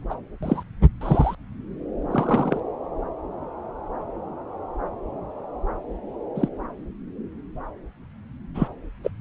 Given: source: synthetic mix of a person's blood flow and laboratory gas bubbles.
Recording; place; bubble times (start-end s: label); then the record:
Doppler ultrasound of blood flow; subclavian vein
0.09-0.14 s: bubbles
0.43-0.63 s: bubbles
1.01-1.35 s: bubbles
2.11-2.60 s: bubbles
6.35-6.49 s: bubbles
8.54-8.68 s: bubbles
9.04-9.10 s: bubbles
From the record:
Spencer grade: 2 (many but less than half of the cardiac periods contain bubble signals, singularly or in groups); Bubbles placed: anywhere in the cardiac cycle